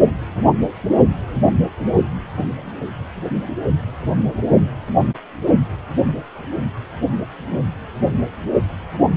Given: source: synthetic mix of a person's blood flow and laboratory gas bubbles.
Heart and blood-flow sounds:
Doppler ultrasound of blood flow; precordium
no bubbles
From the record:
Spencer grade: 0 (complete lack of bubble signals)

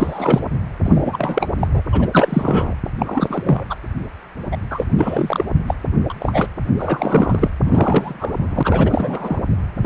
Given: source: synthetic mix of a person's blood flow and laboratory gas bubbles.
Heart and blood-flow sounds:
Doppler ultrasound of blood flow; precordium
0.00-0.43 s: bubbles
0.84-1.48 s: bubbles
1.60-1.67 s: bubbles
1.73-1.82 s: bubbles
1.92-2.75 s: bubbles
2.98-3.65 s: bubbles
3.69-3.75 s: bubbles
4.51-4.57 s: bubbles
4.70-4.85 s: bubbles
4.97-5.44 s: bubbles
5.67-5.75 s: bubbles
6.10-6.14 s: bubbles
6.20-6.47 s: bubbles
6.79-7.50 s: bubbles
7.65-9.42 s: bubbles
9.81-9.86 s: bubbles
From the record:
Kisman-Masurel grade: 342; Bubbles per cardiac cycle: rolling drumbeat, 9 or more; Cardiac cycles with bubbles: 100%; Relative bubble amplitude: moderate (0.250 to 0.450); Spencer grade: 3 (all of the cardiac periods contain showers or single bubble signals, but not dominating or overriding the cardiac motion signals); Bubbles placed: anywhere in the cardiac cycle

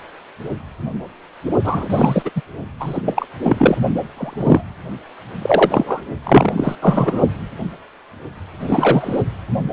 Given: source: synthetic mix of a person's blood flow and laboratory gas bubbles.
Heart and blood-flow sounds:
Doppler ultrasound of blood flow; precordium
1.64-1.86 s: bubbles
1.90-2.22 s: bubbles
2.25-2.30 s: bubbles
2.35-2.42 s: bubbles
2.79-3.02 s: bubbles
3.04-3.25 s: bubbles
3.42-3.76 s: bubbles
4.17-4.64 s: bubbles
5.42-6.06 s: bubbles
6.24-6.75 s: bubbles
6.82-7.21 s: bubbles
8.60-9.22 s: bubbles
From the record:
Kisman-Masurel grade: 233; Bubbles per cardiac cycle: several, 3 to 8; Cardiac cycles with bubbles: 50 to 99%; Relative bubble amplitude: loud (0.450 to 0.775); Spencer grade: 3 (all of the cardiac periods contain showers or single bubble signals, but not dominating or overriding the cardiac motion signals); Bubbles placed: only in the low amplitude regions of the cardiac cycle

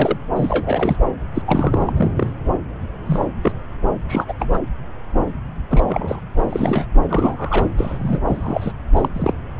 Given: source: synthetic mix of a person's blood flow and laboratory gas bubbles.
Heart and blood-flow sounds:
Doppler ultrasound of blood flow; subclavian vein
0.00-0.17 s: bubbles
0.36-0.96 s: bubbles
1.34-1.42 s: bubbles
1.46-1.93 s: bubbles
1.95-2.10 s: bubbles
2.16-2.33 s: bubbles
3.06-3.26 s: bubbles
3.43-3.52 s: bubbles
4.08-4.25 s: bubbles
4.28-4.33 s: bubbles
4.39-4.58 s: bubbles
5.70-6.21 s: bubbles
6.37-6.87 s: bubbles
7.09-7.70 s: bubbles
7.77-8.21 s: bubbles
8.26-8.72 s: bubbles
8.96-9.08 s: bubbles
9.13-9.33 s: bubbles
From the record:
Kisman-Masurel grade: 232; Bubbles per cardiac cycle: several, 3 to 8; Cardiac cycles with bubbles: 50 to 99%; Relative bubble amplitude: moderate (0.250 to 0.450); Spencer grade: 3 (all of the cardiac periods contain showers or single bubble signals, but not dominating or overriding the cardiac motion signals); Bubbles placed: anywhere in the cardiac cycle

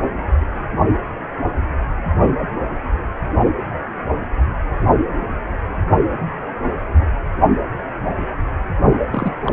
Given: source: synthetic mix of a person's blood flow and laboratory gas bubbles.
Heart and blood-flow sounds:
Doppler ultrasound of blood flow; precordium
9.10-9.32 s: bubbles
9.43-9.52 s: bubbles
From the record:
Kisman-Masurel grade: 222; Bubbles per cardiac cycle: several, 3 to 8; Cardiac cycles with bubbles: 10 to 50%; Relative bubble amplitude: moderate (0.250 to 0.450); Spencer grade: 2 (many but less than half of the cardiac periods contain bubble signals, singularly or in groups); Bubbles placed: anywhere in the cardiac cycle

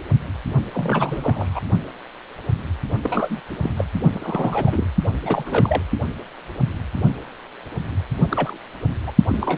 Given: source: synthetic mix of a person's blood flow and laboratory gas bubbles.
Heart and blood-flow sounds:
Doppler ultrasound of blood flow; precordium
0.74-1.60 s: bubbles
3.04-3.41 s: bubbles
3.49-3.56 s: bubbles
3.60-3.71 s: bubbles
3.77-3.85 s: bubbles
4.13-4.87 s: bubbles
5.22-5.43 s: bubbles
5.46-5.82 s: bubbles
8.30-8.57 s: bubbles
9.06-9.12 s: bubbles
9.29-9.58 s: bubbles
From the record:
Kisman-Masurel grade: 222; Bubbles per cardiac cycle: several, 3 to 8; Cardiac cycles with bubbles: 10 to 50%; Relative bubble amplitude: moderate (0.250 to 0.450); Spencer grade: 2 (many but less than half of the cardiac periods contain bubble signals, singularly or in groups); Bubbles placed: only in the low amplitude regions of the cardiac cycle

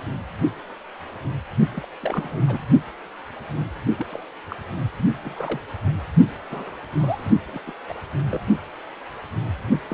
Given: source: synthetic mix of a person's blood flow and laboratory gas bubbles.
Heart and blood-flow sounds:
Doppler ultrasound of blood flow; precordium
1.73-1.86 s: bubbles
2.00-2.40 s: bubbles
2.48-2.65 s: bubbles
3.97-4.07 s: bubbles
4.09-4.20 s: bubbles
4.50-4.56 s: bubbles
5.20-5.62 s: bubbles
6.51-6.76 s: bubbles
6.97-7.34 s: bubbles
7.47-7.62 s: bubbles
7.67-7.72 s: bubbles
7.88-7.93 s: bubbles
8.27-8.41 s: bubbles
9.89-9.94 s: bubbles
From the record:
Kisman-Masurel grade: 221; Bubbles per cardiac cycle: several, 3 to 8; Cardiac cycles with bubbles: 10 to 50%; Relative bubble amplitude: barely perceptible (0.100 to 0.250); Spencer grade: 2 (many but less than half of the cardiac periods contain bubble signals, singularly or in groups); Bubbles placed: only in the low amplitude regions of the cardiac cycle

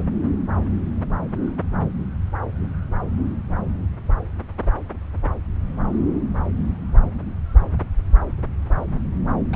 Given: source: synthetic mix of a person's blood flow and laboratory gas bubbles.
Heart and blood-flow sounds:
Doppler ultrasound of blood flow; subclavian vein
9.52-9.56 s: bubbles
From the record:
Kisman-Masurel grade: 211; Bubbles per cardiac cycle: several, 3 to 8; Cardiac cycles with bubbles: 1 to 10%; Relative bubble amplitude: barely perceptible (0.100 to 0.250); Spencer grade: 1 (occasional bubble signal discernible with the cardiac motion signal, with majority of cardiac periods free of bubbles); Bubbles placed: anywhere in the cardiac cycle

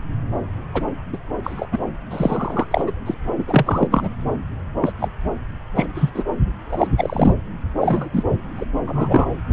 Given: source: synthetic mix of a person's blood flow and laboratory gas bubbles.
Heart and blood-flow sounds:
Doppler ultrasound of blood flow; subclavian vein
0.74-0.82 s: bubbles
1.12-1.17 s: bubbles
1.44-1.66 s: bubbles
1.72-1.78 s: bubbles
2.11-2.66 s: bubbles
2.71-2.92 s: bubbles
3.06-3.15 s: bubbles
3.38-3.88 s: bubbles
3.91-4.08 s: bubbles
4.81-4.92 s: bubbles
4.99-5.08 s: bubbles
5.75-5.86 s: bubbles
5.95-6.10 s: bubbles
6.14-6.24 s: bubbles
6.70-6.87 s: bubbles
6.98-7.32 s: bubbles
7.81-8.08 s: bubbles
8.13-8.23 s: bubbles
8.57-8.66 s: bubbles
8.86-9.27 s: bubbles
9.50-9.53 s: bubbles
From the record:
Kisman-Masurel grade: 243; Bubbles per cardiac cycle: several, 3 to 8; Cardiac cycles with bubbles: 100%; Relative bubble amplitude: loud (0.450 to 0.775); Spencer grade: 3 (all of the cardiac periods contain showers or single bubble signals, but not dominating or overriding the cardiac motion signals); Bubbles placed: anywhere in the cardiac cycle

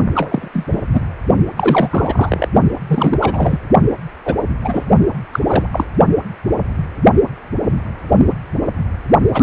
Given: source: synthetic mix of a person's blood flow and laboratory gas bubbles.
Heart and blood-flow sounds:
Doppler ultrasound of blood flow; precordium
0.15-0.48 s: bubbles
0.53-0.65 s: bubbles
0.71-0.82 s: bubbles
0.93-1.00 s: bubbles
1.57-2.48 s: bubbles
2.89-3.59 s: bubbles
4.25-4.36 s: bubbles
4.64-4.84 s: bubbles
5.33-5.40 s: bubbles
5.44-5.67 s: bubbles
5.72-5.86 s: bubbles
9.34-9.43 s: bubbles
From the record:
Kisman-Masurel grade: 233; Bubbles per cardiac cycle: several, 3 to 8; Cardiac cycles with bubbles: 50 to 99%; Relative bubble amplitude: loud (0.450 to 0.775); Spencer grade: 3 (all of the cardiac periods contain showers or single bubble signals, but not dominating or overriding the cardiac motion signals); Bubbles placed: only in the low amplitude regions of the cardiac cycle

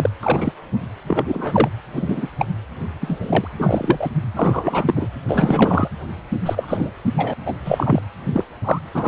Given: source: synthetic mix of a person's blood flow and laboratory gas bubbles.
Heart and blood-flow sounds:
Doppler ultrasound of blood flow; precordium
0.00-0.11 s: bubbles
0.23-0.52 s: bubbles
1.07-1.23 s: bubbles
1.25-1.68 s: bubbles
1.93-2.28 s: bubbles
2.39-2.46 s: bubbles
3.01-3.47 s: bubbles
3.57-4.09 s: bubbles
4.36-5.08 s: bubbles
5.28-5.88 s: bubbles
6.46-6.91 s: bubbles
7.17-7.34 s: bubbles
7.46-7.54 s: bubbles
7.65-8.02 s: bubbles
8.33-8.44 s: bubbles
8.64-8.79 s: bubbles
8.94-9.08 s: bubbles
From the record:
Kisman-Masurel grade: 243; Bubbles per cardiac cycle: several, 3 to 8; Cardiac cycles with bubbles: 100%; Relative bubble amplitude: loud (0.450 to 0.775); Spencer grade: 3 (all of the cardiac periods contain showers or single bubble signals, but not dominating or overriding the cardiac motion signals); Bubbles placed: anywhere in the cardiac cycle

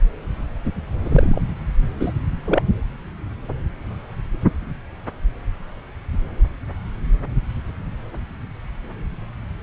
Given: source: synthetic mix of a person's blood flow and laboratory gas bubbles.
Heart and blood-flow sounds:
Doppler ultrasound of blood flow; subclavian vein
1.04-1.42 s: bubbles
2.00-2.12 s: bubbles
2.46-2.62 s: bubbles
From the record:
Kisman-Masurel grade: 123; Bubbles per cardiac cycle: 1 to 2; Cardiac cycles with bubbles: 10 to 50%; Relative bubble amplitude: loud (0.450 to 0.775); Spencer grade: 2 (many but less than half of the cardiac periods contain bubble signals, singularly or in groups); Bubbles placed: anywhere in the cardiac cycle

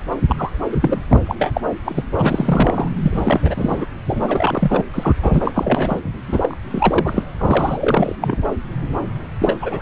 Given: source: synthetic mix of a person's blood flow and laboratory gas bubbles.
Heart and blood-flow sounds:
Doppler ultrasound of blood flow; subclavian vein
0.28-0.50 s: bubbles
0.71-0.77 s: bubbles
0.80-1.02 s: bubbles
1.10-1.20 s: bubbles
1.26-1.35 s: bubbles
1.39-1.60 s: bubbles
1.85-2.03 s: bubbles
2.18-2.90 s: bubbles
2.96-3.41 s: bubbles
3.44-3.85 s: bubbles
4.07-4.83 s: bubbles
4.94-5.12 s: bubbles
5.22-6.00 s: bubbles
6.28-6.58 s: bubbles
6.73-7.23 s: bubbles
7.39-8.15 s: bubbles
8.21-8.38 s: bubbles
9.40-9.58 s: bubbles
9.62-9.82 s: bubbles
From the record:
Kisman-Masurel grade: 332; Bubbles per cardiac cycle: rolling drumbeat, 9 or more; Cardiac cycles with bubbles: 50 to 99%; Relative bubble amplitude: moderate (0.250 to 0.450); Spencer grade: 3 (all of the cardiac periods contain showers or single bubble signals, but not dominating or overriding the cardiac motion signals); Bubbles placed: anywhere in the cardiac cycle

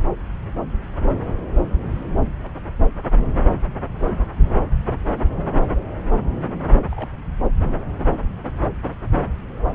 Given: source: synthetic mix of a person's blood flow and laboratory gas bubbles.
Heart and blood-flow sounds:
Doppler ultrasound of blood flow; subclavian vein
6.91-7.12 s: bubbles
From the record:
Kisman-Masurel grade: 111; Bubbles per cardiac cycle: 1 to 2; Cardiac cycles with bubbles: 1 to 10%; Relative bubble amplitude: barely perceptible (0.100 to 0.250); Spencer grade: 1 (occasional bubble signal discernible with the cardiac motion signal, with majority of cardiac periods free of bubbles); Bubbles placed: anywhere in the cardiac cycle

